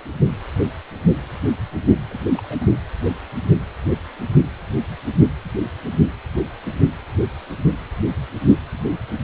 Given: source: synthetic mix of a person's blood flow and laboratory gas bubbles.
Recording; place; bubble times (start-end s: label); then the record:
Doppler ultrasound of blood flow; precordium
2.11-2.14 s: bubbles
2.31-2.58 s: bubbles
2.61-2.76 s: bubbles
From the record:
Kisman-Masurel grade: 221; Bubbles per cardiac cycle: several, 3 to 8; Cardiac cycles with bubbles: 10 to 50%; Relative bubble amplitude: barely perceptible (0.100 to 0.250); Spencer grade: 2 (many but less than half of the cardiac periods contain bubble signals, singularly or in groups); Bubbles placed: anywhere in the cardiac cycle